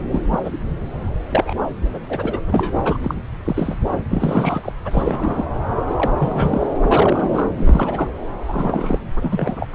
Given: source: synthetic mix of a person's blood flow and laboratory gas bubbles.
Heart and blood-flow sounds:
Doppler ultrasound of blood flow; subclavian vein
0.10-0.23 s: bubbles
0.31-0.41 s: bubbles
0.44-0.58 s: bubbles
1.29-1.57 s: bubbles
1.84-1.99 s: bubbles
2.08-2.38 s: bubbles
2.51-2.98 s: bubbles
3.04-3.15 s: bubbles
3.44-3.77 s: bubbles
4.10-4.72 s: bubbles
4.84-5.45 s: bubbles
5.87-6.11 s: bubbles
6.18-6.67 s: bubbles
6.80-7.46 s: bubbles
7.55-8.08 s: bubbles
8.48-8.99 s: bubbles
9.22-9.56 s: bubbles
9.61-9.67 s: bubbles
From the record:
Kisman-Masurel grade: 242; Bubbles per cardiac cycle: several, 3 to 8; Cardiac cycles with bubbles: 100%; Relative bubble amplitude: moderate (0.250 to 0.450); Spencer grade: 3 (all of the cardiac periods contain showers or single bubble signals, but not dominating or overriding the cardiac motion signals); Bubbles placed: anywhere in the cardiac cycle

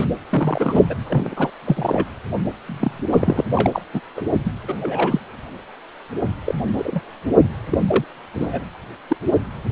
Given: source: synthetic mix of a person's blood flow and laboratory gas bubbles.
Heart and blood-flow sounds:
Doppler ultrasound of blood flow; precordium
0.00-0.06 s: bubbles
0.31-0.84 s: bubbles
0.89-0.95 s: bubbles
1.08-1.50 s: bubbles
1.65-2.07 s: bubbles
2.65-3.07 s: bubbles
3.12-3.44 s: bubbles
3.55-3.81 s: bubbles
3.93-4.01 s: bubbles
4.16-4.22 s: bubbles
4.45-4.50 s: bubbles
4.68-4.75 s: bubbles
4.81-5.21 s: bubbles
6.46-6.55 s: bubbles
6.78-7.00 s: bubbles
7.71-7.78 s: bubbles
7.87-8.04 s: bubbles
8.35-8.64 s: bubbles
9.09-9.16 s: bubbles
From the record:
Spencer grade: 3 (all of the cardiac periods contain showers or single bubble signals, but not dominating or overriding the cardiac motion signals); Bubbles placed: anywhere in the cardiac cycle

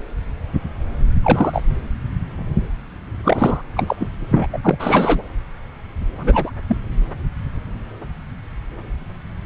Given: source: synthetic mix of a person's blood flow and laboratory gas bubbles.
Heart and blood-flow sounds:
Doppler ultrasound of blood flow; subclavian vein
1.22-1.62 s: bubbles
3.24-3.62 s: bubbles
3.77-3.96 s: bubbles
4.00-4.07 s: bubbles
4.33-4.46 s: bubbles
4.53-4.58 s: bubbles
4.62-5.23 s: bubbles
6.18-6.50 s: bubbles
6.67-6.77 s: bubbles
From the record:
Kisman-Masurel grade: 223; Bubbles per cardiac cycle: several, 3 to 8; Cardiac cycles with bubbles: 10 to 50%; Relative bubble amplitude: loud (0.450 to 0.775); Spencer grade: 2 (many but less than half of the cardiac periods contain bubble signals, singularly or in groups); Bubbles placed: anywhere in the cardiac cycle

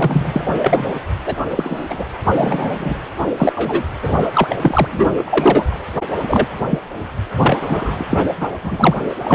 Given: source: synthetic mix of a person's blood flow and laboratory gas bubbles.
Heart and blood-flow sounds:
Doppler ultrasound of blood flow; precordium
0.00-0.45 s: bubbles
0.63-0.98 s: bubbles
1.26-1.35 s: bubbles
1.48-1.84 s: bubbles
1.90-2.04 s: bubbles
2.36-2.94 s: bubbles
3.36-3.84 s: bubbles
4.02-4.30 s: bubbles
4.34-4.58 s: bubbles
4.62-4.88 s: bubbles
4.92-5.07 s: bubbles
5.17-5.77 s: bubbles
6.22-6.46 s: bubbles
6.71-6.79 s: bubbles
7.40-7.58 s: bubbles
7.62-8.04 s: bubbles
8.11-8.25 s: bubbles
8.40-8.48 s: bubbles
8.63-8.95 s: bubbles
9.04-9.15 s: bubbles
9.23-9.35 s: bubbles
From the record:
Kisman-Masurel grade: 243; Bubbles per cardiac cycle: several, 3 to 8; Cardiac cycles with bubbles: 100%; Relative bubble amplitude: loud (0.450 to 0.775); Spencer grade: 3 (all of the cardiac periods contain showers or single bubble signals, but not dominating or overriding the cardiac motion signals); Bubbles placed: anywhere in the cardiac cycle

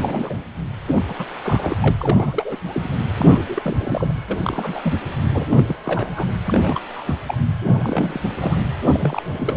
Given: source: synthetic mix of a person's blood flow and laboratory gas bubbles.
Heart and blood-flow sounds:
Doppler ultrasound of blood flow; precordium
0.00-0.43 s: bubbles
0.88-1.03 s: bubbles
1.08-1.15 s: bubbles
1.18-1.25 s: bubbles
1.42-1.77 s: bubbles
1.82-1.96 s: bubbles
1.99-2.57 s: bubbles
2.68-2.88 s: bubbles
3.17-3.38 s: bubbles
3.48-3.62 s: bubbles
3.65-4.23 s: bubbles
4.29-4.94 s: bubbles
5.31-5.46 s: bubbles
5.50-5.64 s: bubbles
5.67-5.75 s: bubbles
5.85-6.26 s: bubbles
6.46-6.81 s: bubbles
6.89-7.15 s: bubbles
7.27-7.38 s: bubbles
7.66-8.21 s: bubbles
8.41-8.57 s: bubbles
8.83-9.57 s: bubbles
From the record:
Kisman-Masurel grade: 332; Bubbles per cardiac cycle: rolling drumbeat, 9 or more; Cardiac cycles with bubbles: 50 to 99%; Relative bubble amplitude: moderate (0.250 to 0.450); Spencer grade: 3 (all of the cardiac periods contain showers or single bubble signals, but not dominating or overriding the cardiac motion signals); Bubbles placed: anywhere in the cardiac cycle

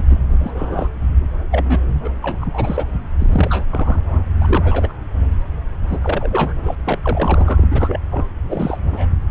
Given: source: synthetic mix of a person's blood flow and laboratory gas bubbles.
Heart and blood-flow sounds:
Doppler ultrasound of blood flow; subclavian vein
0.00-0.02 s: bubbles
0.09-0.88 s: bubbles
1.52-1.96 s: bubbles
2.04-2.09 s: bubbles
2.22-2.86 s: bubbles
3.19-3.64 s: bubbles
3.70-4.23 s: bubbles
4.41-4.93 s: bubbles
5.89-5.98 s: bubbles
6.02-6.53 s: bubbles
6.65-6.75 s: bubbles
6.84-6.98 s: bubbles
7.02-7.67 s: bubbles
7.71-8.00 s: bubbles
8.11-8.25 s: bubbles
8.49-8.79 s: bubbles
8.86-9.07 s: bubbles
From the record:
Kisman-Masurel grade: 332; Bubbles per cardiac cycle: rolling drumbeat, 9 or more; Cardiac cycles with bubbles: 50 to 99%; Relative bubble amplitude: moderate (0.250 to 0.450); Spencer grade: 3 (all of the cardiac periods contain showers or single bubble signals, but not dominating or overriding the cardiac motion signals); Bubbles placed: anywhere in the cardiac cycle

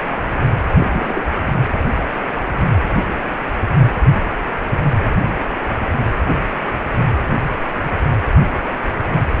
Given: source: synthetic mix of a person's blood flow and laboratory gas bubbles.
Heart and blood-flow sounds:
Doppler ultrasound of blood flow; precordium
0.78-1.23 s: bubbles
From the record:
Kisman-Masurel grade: 113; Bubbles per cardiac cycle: 1 to 2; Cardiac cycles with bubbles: 1 to 10%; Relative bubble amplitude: loud (0.450 to 0.775); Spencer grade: 1 (occasional bubble signal discernible with the cardiac motion signal, with majority of cardiac periods free of bubbles); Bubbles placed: anywhere in the cardiac cycle

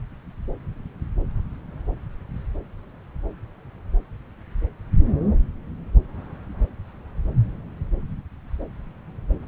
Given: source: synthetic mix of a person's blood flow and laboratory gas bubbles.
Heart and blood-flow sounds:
Doppler ultrasound of blood flow; subclavian vein
no bubbles
From the record:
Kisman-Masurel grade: 000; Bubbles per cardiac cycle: 0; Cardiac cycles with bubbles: 0%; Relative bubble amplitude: no bubbles discernible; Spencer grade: 0 (complete lack of bubble signals)

